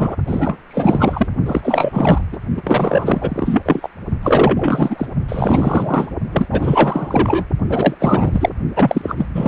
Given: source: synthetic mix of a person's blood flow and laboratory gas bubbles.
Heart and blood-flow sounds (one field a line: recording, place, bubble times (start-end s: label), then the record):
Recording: Doppler ultrasound of blood flow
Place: precordium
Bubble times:
0.00-0.16 s: bubbles
0.27-0.58 s: bubbles
0.70-1.27 s: bubbles
1.46-2.25 s: bubbles
2.32-2.38 s: bubbles
2.57-3.62 s: bubbles
3.65-3.88 s: bubbles
4.23-5.06 s: bubbles
5.29-6.08 s: bubbles
6.32-6.46 s: bubbles
6.51-7.45 s: bubbles
7.69-7.96 s: bubbles
8.00-8.49 s: bubbles
8.76-9.26 s: bubbles
9.34-9.48 s: bubbles
From the record:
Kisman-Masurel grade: 444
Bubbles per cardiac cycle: continuous sound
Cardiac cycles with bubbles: 100%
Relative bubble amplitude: maximal (0.775 to 0.999)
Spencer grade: 4 (maximum detectable bubble signal sounding continuously throughout systole and diastole of every cardiac period, and overriding the amplitude of the normal cardiac signals)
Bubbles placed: only in the low amplitude regions of the cardiac cycle